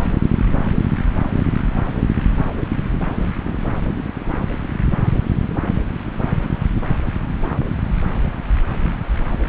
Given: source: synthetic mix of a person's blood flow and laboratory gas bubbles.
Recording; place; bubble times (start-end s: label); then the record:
Doppler ultrasound of blood flow; subclavian vein
no bubbles
From the record:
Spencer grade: 0 (complete lack of bubble signals)